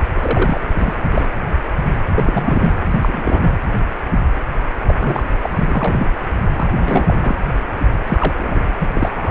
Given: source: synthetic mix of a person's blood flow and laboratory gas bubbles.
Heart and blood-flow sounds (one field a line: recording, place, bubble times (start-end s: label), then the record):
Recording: Doppler ultrasound of blood flow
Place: precordium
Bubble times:
0.15-0.59 s: bubbles
0.69-0.96 s: bubbles
1.10-1.27 s: bubbles
2.15-2.75 s: bubbles
2.90-3.52 s: bubbles
4.88-4.94 s: bubbles
5.00-5.28 s: bubbles
5.40-6.09 s: bubbles
6.54-7.36 s: bubbles
8.07-8.34 s: bubbles
8.38-8.71 s: bubbles
8.79-8.88 s: bubbles
8.95-9.10 s: bubbles
9.15-9.31 s: bubbles
From the record:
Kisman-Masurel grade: 232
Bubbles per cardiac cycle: several, 3 to 8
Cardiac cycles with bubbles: 50 to 99%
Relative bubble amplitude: moderate (0.250 to 0.450)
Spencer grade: 3 (all of the cardiac periods contain showers or single bubble signals, but not dominating or overriding the cardiac motion signals)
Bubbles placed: anywhere in the cardiac cycle